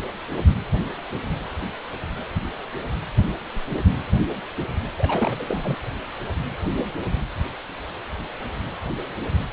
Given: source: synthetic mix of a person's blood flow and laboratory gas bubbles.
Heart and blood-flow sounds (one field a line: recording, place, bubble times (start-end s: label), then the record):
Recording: Doppler ultrasound of blood flow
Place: precordium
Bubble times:
4.98-5.77 s: bubbles
From the record:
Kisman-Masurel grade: 211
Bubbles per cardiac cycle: several, 3 to 8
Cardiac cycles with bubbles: 1 to 10%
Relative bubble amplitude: barely perceptible (0.100 to 0.250)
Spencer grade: 1 (occasional bubble signal discernible with the cardiac motion signal, with majority of cardiac periods free of bubbles)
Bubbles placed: anywhere in the cardiac cycle